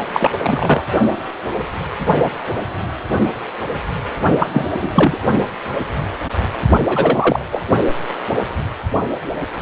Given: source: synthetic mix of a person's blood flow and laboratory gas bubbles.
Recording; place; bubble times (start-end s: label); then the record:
Doppler ultrasound of blood flow; precordium
0.12-0.31 s: bubbles
0.42-0.84 s: bubbles
4.39-4.49 s: bubbles
4.53-4.66 s: bubbles
4.75-5.17 s: bubbles
6.87-7.46 s: bubbles
7.52-7.62 s: bubbles
From the record:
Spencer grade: 2 (many but less than half of the cardiac periods contain bubble signals, singularly or in groups); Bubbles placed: only in the low amplitude regions of the cardiac cycle